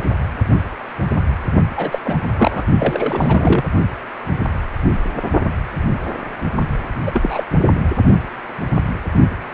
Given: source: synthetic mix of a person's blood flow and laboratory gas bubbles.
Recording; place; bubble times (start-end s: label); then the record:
Doppler ultrasound of blood flow; precordium
1.76-1.99 s: bubbles
2.04-2.23 s: bubbles
2.33-2.63 s: bubbles
2.78-3.63 s: bubbles
7.06-7.11 s: bubbles
7.14-7.44 s: bubbles
7.75-7.82 s: bubbles
From the record:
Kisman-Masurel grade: 222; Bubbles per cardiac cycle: several, 3 to 8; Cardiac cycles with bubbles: 10 to 50%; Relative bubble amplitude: moderate (0.250 to 0.450); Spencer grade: 2 (many but less than half of the cardiac periods contain bubble signals, singularly or in groups); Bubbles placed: only in the low amplitude regions of the cardiac cycle